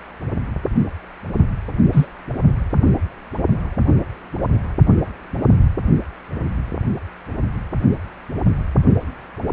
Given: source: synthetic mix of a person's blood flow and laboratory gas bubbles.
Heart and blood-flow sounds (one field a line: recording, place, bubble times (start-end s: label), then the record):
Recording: Doppler ultrasound of blood flow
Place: precordium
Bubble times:
1.92-2.08 s: bubbles
From the record:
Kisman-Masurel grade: 123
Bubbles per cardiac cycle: 1 to 2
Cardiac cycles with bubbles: 10 to 50%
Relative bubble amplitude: loud (0.450 to 0.775)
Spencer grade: 2 (many but less than half of the cardiac periods contain bubble signals, singularly or in groups)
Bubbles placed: only in the low amplitude regions of the cardiac cycle